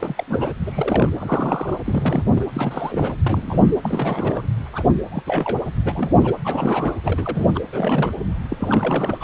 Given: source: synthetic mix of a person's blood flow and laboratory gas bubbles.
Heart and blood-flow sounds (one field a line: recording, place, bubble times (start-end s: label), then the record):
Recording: Doppler ultrasound of blood flow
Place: precordium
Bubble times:
0.00-0.24 s: bubbles
0.28-0.53 s: bubbles
0.66-1.10 s: bubbles
1.18-1.78 s: bubbles
1.85-2.46 s: bubbles
2.53-3.17 s: bubbles
3.26-3.72 s: bubbles
3.83-4.46 s: bubbles
4.73-4.84 s: bubbles
5.11-5.22 s: bubbles
5.26-5.58 s: bubbles
5.81-6.34 s: bubbles
6.43-6.93 s: bubbles
7.04-7.49 s: bubbles
7.54-7.60 s: bubbles
7.72-8.13 s: bubbles
8.50-8.57 s: bubbles
8.60-9.24 s: bubbles
From the record:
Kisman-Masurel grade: 342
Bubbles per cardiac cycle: rolling drumbeat, 9 or more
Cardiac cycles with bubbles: 100%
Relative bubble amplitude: moderate (0.250 to 0.450)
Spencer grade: 3 (all of the cardiac periods contain showers or single bubble signals, but not dominating or overriding the cardiac motion signals)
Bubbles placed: anywhere in the cardiac cycle